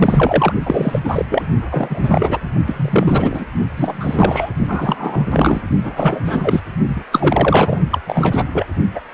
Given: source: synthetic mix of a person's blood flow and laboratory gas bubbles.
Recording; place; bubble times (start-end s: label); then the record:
Doppler ultrasound of blood flow; precordium
0.00-0.53 s: bubbles
0.64-1.00 s: bubbles
1.04-1.25 s: bubbles
1.29-1.43 s: bubbles
1.68-2.38 s: bubbles
2.66-3.46 s: bubbles
3.76-4.50 s: bubbles
4.67-5.25 s: bubbles
5.31-5.61 s: bubbles
5.83-6.61 s: bubbles
6.88-7.04 s: bubbles
7.12-7.79 s: bubbles
7.91-7.99 s: bubbles
8.07-8.44 s: bubbles
8.53-8.66 s: bubbles
8.95-9.00 s: bubbles
From the record:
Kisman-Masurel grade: 343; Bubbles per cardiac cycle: rolling drumbeat, 9 or more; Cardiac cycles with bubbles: 100%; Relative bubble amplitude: loud (0.450 to 0.775); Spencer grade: 3 (all of the cardiac periods contain showers or single bubble signals, but not dominating or overriding the cardiac motion signals); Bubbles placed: only in the low amplitude regions of the cardiac cycle